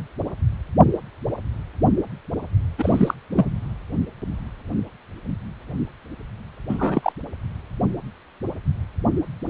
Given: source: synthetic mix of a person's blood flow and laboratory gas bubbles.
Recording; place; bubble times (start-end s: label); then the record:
Doppler ultrasound of blood flow; precordium
2.78-3.14 s: bubbles
3.32-3.52 s: bubbles
6.68-7.12 s: bubbles
From the record:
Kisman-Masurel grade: 222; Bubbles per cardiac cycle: several, 3 to 8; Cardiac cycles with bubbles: 10 to 50%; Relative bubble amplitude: moderate (0.250 to 0.450); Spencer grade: 2 (many but less than half of the cardiac periods contain bubble signals, singularly or in groups); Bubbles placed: anywhere in the cardiac cycle